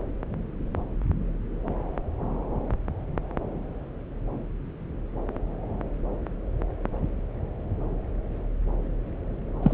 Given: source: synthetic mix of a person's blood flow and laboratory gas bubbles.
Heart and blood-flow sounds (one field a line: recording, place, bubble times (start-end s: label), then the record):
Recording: Doppler ultrasound of blood flow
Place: subclavian vein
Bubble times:
9.62-9.74 s: bubbles
From the record:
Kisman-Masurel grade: 222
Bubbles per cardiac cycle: several, 3 to 8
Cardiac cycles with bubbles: 10 to 50%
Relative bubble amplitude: moderate (0.250 to 0.450)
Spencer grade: 2 (many but less than half of the cardiac periods contain bubble signals, singularly or in groups)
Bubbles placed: anywhere in the cardiac cycle